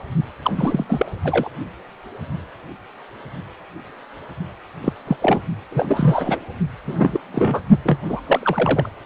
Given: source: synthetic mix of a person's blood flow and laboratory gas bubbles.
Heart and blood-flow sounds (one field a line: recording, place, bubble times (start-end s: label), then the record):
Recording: Doppler ultrasound of blood flow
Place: precordium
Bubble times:
0.42-0.51 s: bubbles
0.55-0.84 s: bubbles
0.89-1.11 s: bubbles
1.25-1.50 s: bubbles
4.82-4.93 s: bubbles
5.07-5.17 s: bubbles
5.21-5.42 s: bubbles
5.71-6.39 s: bubbles
6.85-7.21 s: bubbles
7.33-7.60 s: bubbles
7.85-7.98 s: bubbles
8.08-8.20 s: bubbles
8.23-8.89 s: bubbles
From the record:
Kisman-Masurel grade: 232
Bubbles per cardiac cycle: several, 3 to 8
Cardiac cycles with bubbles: 50 to 99%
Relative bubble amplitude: moderate (0.250 to 0.450)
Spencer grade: 3 (all of the cardiac periods contain showers or single bubble signals, but not dominating or overriding the cardiac motion signals)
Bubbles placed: only in the low amplitude regions of the cardiac cycle